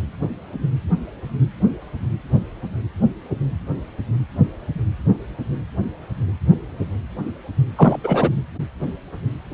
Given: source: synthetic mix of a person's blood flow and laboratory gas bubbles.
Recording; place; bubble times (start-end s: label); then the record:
Doppler ultrasound of blood flow; precordium
7.76-7.97 s: bubbles
8.04-8.30 s: bubbles
From the record:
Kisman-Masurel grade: 222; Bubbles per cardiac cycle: several, 3 to 8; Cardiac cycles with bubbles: 10 to 50%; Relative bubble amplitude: moderate (0.250 to 0.450); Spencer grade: 2 (many but less than half of the cardiac periods contain bubble signals, singularly or in groups); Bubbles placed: anywhere in the cardiac cycle